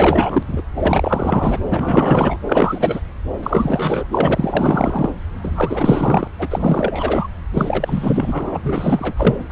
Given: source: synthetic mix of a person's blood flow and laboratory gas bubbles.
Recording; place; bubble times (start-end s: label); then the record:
Doppler ultrasound of blood flow; subclavian vein
0.00-0.43 s: bubbles
0.48-0.62 s: bubbles
0.75-1.59 s: bubbles
1.66-2.40 s: bubbles
2.47-3.00 s: bubbles
3.42-4.08 s: bubbles
4.11-5.12 s: bubbles
5.42-6.27 s: bubbles
6.38-7.28 s: bubbles
7.54-8.60 s: bubbles
8.63-9.15 s: bubbles
9.17-9.42 s: bubbles
9.49-9.52 s: bubbles
From the record:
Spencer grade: 4 (maximum detectable bubble signal sounding continuously throughout systole and diastole of every cardiac period, and overriding the amplitude of the normal cardiac signals); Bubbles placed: anywhere in the cardiac cycle